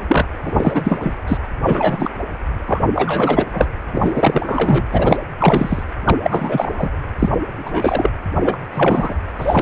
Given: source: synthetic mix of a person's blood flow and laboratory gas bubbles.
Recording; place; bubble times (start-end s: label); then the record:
Doppler ultrasound of blood flow; precordium
0.08-0.28 s: bubbles
0.43-1.16 s: bubbles
1.27-1.38 s: bubbles
1.64-2.11 s: bubbles
2.66-2.81 s: bubbles
2.93-3.46 s: bubbles
3.53-3.66 s: bubbles
3.94-4.85 s: bubbles
4.92-5.19 s: bubbles
5.40-5.83 s: bubbles
6.05-6.17 s: bubbles
6.23-6.91 s: bubbles
7.19-7.29 s: bubbles
7.56-8.10 s: bubbles
8.44-8.56 s: bubbles
8.74-9.14 s: bubbles
9.38-9.61 s: bubbles
From the record:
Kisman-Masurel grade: 343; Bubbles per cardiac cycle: rolling drumbeat, 9 or more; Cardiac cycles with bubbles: 100%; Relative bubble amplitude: loud (0.450 to 0.775); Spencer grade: 3 (all of the cardiac periods contain showers or single bubble signals, but not dominating or overriding the cardiac motion signals); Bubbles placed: anywhere in the cardiac cycle